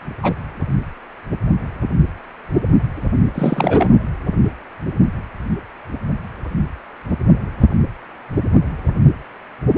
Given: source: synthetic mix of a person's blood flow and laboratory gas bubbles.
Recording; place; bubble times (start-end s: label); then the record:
Doppler ultrasound of blood flow; precordium
0.22-0.34 s: bubbles
3.35-3.92 s: bubbles
From the record:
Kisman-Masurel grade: 223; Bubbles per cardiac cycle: several, 3 to 8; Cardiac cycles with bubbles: 10 to 50%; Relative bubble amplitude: loud (0.450 to 0.775); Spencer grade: 2 (many but less than half of the cardiac periods contain bubble signals, singularly or in groups); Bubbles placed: anywhere in the cardiac cycle